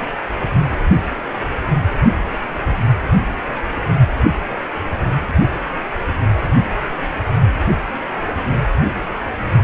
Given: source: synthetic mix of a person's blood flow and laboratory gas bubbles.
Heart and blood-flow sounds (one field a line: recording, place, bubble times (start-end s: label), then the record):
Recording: Doppler ultrasound of blood flow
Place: precordium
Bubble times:
no bubbles
From the record:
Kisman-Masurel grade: 000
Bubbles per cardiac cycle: 0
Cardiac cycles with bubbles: 0%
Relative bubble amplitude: no bubbles discernible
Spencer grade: 0 (complete lack of bubble signals)